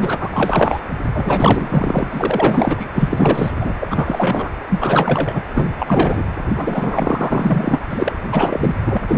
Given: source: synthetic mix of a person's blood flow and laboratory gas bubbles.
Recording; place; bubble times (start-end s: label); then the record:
Doppler ultrasound of blood flow; precordium
0.00-0.30 s: bubbles
0.33-0.81 s: bubbles
1.12-2.76 s: bubbles
2.79-2.87 s: bubbles
2.94-3.50 s: bubbles
3.60-3.73 s: bubbles
3.80-3.88 s: bubbles
3.91-4.50 s: bubbles
4.69-5.41 s: bubbles
5.55-5.72 s: bubbles
5.79-6.24 s: bubbles
6.55-7.79 s: bubbles
7.91-8.12 s: bubbles
8.32-8.75 s: bubbles
8.86-8.98 s: bubbles
9.08-9.18 s: bubbles
From the record:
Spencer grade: 4 (maximum detectable bubble signal sounding continuously throughout systole and diastole of every cardiac period, and overriding the amplitude of the normal cardiac signals); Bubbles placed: anywhere in the cardiac cycle